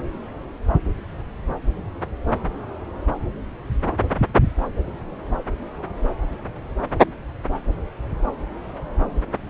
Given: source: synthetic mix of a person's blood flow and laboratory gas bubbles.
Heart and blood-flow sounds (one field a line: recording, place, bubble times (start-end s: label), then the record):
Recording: Doppler ultrasound of blood flow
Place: subclavian vein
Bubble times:
no bubbles
From the record:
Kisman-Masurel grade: 000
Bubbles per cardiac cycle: 0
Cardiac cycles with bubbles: 0%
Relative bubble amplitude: no bubbles discernible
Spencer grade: 0 (complete lack of bubble signals)